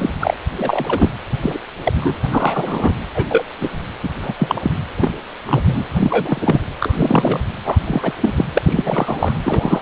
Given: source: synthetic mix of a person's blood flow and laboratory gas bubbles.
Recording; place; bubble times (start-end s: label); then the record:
Doppler ultrasound of blood flow; precordium
0.00-0.10 s: bubbles
0.20-0.36 s: bubbles
0.56-1.09 s: bubbles
1.42-1.58 s: bubbles
1.83-1.93 s: bubbles
1.99-2.17 s: bubbles
2.29-2.93 s: bubbles
3.15-3.44 s: bubbles
3.60-3.70 s: bubbles
4.02-4.09 s: bubbles
4.21-4.33 s: bubbles
4.38-4.71 s: bubbles
5.00-5.09 s: bubbles
5.46-5.84 s: bubbles
5.96-6.65 s: bubbles
6.80-7.40 s: bubbles
7.63-7.79 s: bubbles
7.87-8.13 s: bubbles
8.21-8.45 s: bubbles
8.54-8.62 s: bubbles
8.66-9.37 s: bubbles
9.43-9.82 s: bubbles
From the record:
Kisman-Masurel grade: 243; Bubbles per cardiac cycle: several, 3 to 8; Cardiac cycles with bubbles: 100%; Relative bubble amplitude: loud (0.450 to 0.775); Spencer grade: 3 (all of the cardiac periods contain showers or single bubble signals, but not dominating or overriding the cardiac motion signals); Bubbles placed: anywhere in the cardiac cycle